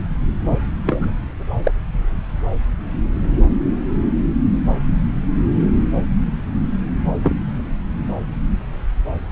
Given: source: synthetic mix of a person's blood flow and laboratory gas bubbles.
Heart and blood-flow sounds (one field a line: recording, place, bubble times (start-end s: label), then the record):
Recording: Doppler ultrasound of blood flow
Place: subclavian vein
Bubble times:
0.86-1.10 s: bubbles
1.63-1.72 s: bubbles
7.22-7.35 s: bubbles
From the record:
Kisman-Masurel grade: 122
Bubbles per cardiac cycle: 1 to 2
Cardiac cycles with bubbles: 10 to 50%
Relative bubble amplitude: moderate (0.250 to 0.450)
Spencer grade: 2 (many but less than half of the cardiac periods contain bubble signals, singularly or in groups)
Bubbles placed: anywhere in the cardiac cycle